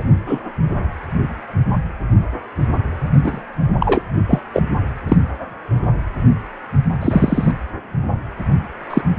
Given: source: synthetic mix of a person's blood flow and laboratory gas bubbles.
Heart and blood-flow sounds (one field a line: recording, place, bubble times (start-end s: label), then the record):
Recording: Doppler ultrasound of blood flow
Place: precordium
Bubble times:
0.00-0.03 s: bubbles
0.27-0.42 s: bubbles
3.23-3.41 s: bubbles
3.80-4.02 s: bubbles
4.27-4.39 s: bubbles
4.54-4.62 s: bubbles
5.08-5.17 s: bubbles
7.01-7.51 s: bubbles
8.90-9.02 s: bubbles
From the record:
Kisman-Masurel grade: 123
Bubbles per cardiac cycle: 1 to 2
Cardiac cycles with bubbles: 10 to 50%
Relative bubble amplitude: loud (0.450 to 0.775)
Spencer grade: 2 (many but less than half of the cardiac periods contain bubble signals, singularly or in groups)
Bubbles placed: anywhere in the cardiac cycle